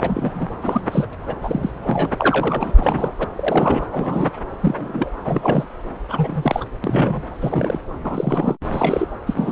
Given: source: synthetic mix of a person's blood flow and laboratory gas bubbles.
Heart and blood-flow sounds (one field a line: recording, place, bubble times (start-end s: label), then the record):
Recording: Doppler ultrasound of blood flow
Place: subclavian vein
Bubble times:
0.00-0.46 s: bubbles
0.61-0.81 s: bubbles
0.91-1.06 s: bubbles
1.21-1.37 s: bubbles
1.41-1.71 s: bubbles
1.75-1.79 s: bubbles
1.81-2.10 s: bubbles
2.18-2.72 s: bubbles
2.76-3.12 s: bubbles
3.19-3.27 s: bubbles
3.35-3.86 s: bubbles
3.92-4.31 s: bubbles
4.60-5.10 s: bubbles
5.24-5.68 s: bubbles
6.09-6.64 s: bubbles
6.84-7.23 s: bubbles
7.33-7.80 s: bubbles
8.04-8.57 s: bubbles
8.71-9.06 s: bubbles
9.26-9.52 s: bubbles
From the record:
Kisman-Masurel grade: 242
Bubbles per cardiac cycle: several, 3 to 8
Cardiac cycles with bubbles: 100%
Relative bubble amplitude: moderate (0.250 to 0.450)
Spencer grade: 3 (all of the cardiac periods contain showers or single bubble signals, but not dominating or overriding the cardiac motion signals)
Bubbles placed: anywhere in the cardiac cycle